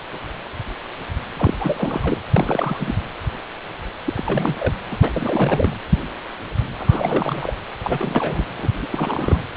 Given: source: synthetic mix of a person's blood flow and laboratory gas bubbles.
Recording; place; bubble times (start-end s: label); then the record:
Doppler ultrasound of blood flow; precordium
1.36-1.54 s: bubbles
1.59-2.18 s: bubbles
2.36-2.95 s: bubbles
4.04-4.74 s: bubbles
4.91-4.97 s: bubbles
5.03-5.75 s: bubbles
6.79-7.55 s: bubbles
7.84-8.43 s: bubbles
8.57-8.69 s: bubbles
8.81-8.88 s: bubbles
8.92-9.39 s: bubbles
9.55-9.57 s: bubbles
From the record:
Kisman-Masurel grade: 332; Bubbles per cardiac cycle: rolling drumbeat, 9 or more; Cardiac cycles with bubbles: 50 to 99%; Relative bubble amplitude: moderate (0.250 to 0.450); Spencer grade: 3 (all of the cardiac periods contain showers or single bubble signals, but not dominating or overriding the cardiac motion signals); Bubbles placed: anywhere in the cardiac cycle